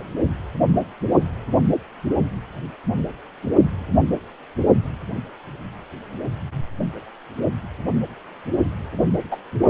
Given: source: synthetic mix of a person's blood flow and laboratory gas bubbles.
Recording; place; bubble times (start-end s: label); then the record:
Doppler ultrasound of blood flow; precordium
9.31-9.37 s: bubbles
From the record:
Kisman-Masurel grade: 113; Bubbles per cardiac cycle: 1 to 2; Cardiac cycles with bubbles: 1 to 10%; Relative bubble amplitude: loud (0.450 to 0.775); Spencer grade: 1 (occasional bubble signal discernible with the cardiac motion signal, with majority of cardiac periods free of bubbles); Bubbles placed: only in the low amplitude regions of the cardiac cycle